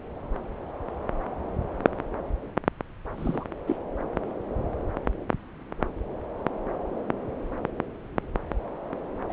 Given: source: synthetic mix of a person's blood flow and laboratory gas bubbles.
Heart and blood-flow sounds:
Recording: Doppler ultrasound of blood flow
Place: subclavian vein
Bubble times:
3.17-3.45 s: bubbles
3.67-3.77 s: bubbles
9.29-9.33 s: bubbles
From the record:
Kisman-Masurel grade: 221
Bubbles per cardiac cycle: several, 3 to 8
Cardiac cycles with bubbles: 10 to 50%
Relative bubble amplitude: barely perceptible (0.100 to 0.250)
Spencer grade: 2 (many but less than half of the cardiac periods contain bubble signals, singularly or in groups)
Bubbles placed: anywhere in the cardiac cycle

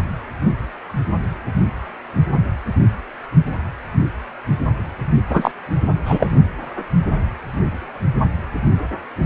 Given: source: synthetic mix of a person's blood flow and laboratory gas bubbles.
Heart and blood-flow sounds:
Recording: Doppler ultrasound of blood flow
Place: precordium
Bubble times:
5.30-5.52 s: bubbles
6.06-6.31 s: bubbles
From the record:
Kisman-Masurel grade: 223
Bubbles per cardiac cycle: several, 3 to 8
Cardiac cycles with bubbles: 10 to 50%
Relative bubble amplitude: loud (0.450 to 0.775)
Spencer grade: 2 (many but less than half of the cardiac periods contain bubble signals, singularly or in groups)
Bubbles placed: only in the low amplitude regions of the cardiac cycle

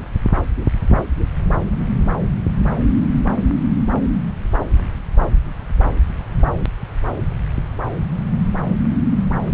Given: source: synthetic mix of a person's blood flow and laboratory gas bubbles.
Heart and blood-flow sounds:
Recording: Doppler ultrasound of blood flow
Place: subclavian vein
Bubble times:
no bubbles
From the record:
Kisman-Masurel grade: 000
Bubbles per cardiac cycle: 0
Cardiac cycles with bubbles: 0%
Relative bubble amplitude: no bubbles discernible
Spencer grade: 0 (complete lack of bubble signals)

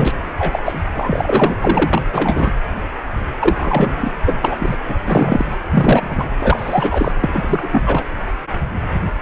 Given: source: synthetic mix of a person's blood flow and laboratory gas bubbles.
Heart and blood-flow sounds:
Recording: Doppler ultrasound of blood flow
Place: precordium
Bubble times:
0.00-0.11 s: bubbles
0.38-0.79 s: bubbles
0.94-2.51 s: bubbles
3.39-4.12 s: bubbles
4.26-4.39 s: bubbles
4.41-4.76 s: bubbles
4.88-4.95 s: bubbles
5.06-5.56 s: bubbles
5.71-6.29 s: bubbles
6.38-7.12 s: bubbles
7.20-8.04 s: bubbles
From the record:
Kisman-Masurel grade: 333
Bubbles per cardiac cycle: rolling drumbeat, 9 or more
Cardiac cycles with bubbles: 50 to 99%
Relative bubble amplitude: loud (0.450 to 0.775)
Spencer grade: 3 (all of the cardiac periods contain showers or single bubble signals, but not dominating or overriding the cardiac motion signals)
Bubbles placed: anywhere in the cardiac cycle

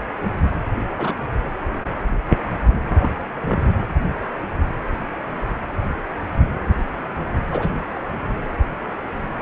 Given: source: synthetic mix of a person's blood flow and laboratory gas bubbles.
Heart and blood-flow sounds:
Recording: Doppler ultrasound of blood flow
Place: precordium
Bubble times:
0.98-1.12 s: bubbles
2.71-3.11 s: bubbles
3.36-3.68 s: bubbles
7.51-7.68 s: bubbles
From the record:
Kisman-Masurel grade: 122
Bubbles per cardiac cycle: 1 to 2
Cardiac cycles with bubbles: 10 to 50%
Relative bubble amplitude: moderate (0.250 to 0.450)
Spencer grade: 2 (many but less than half of the cardiac periods contain bubble signals, singularly or in groups)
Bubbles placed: anywhere in the cardiac cycle

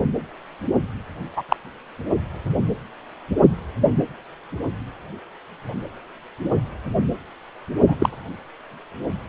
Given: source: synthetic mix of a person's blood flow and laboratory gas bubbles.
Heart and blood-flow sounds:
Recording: Doppler ultrasound of blood flow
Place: precordium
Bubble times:
1.36-1.43 s: bubbles
1.48-1.56 s: bubbles
7.88-7.96 s: bubbles
8.00-8.09 s: bubbles
From the record:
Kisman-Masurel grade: 123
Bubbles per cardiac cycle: 1 to 2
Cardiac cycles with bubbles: 10 to 50%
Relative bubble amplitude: loud (0.450 to 0.775)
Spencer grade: 2 (many but less than half of the cardiac periods contain bubble signals, singularly or in groups)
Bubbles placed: anywhere in the cardiac cycle

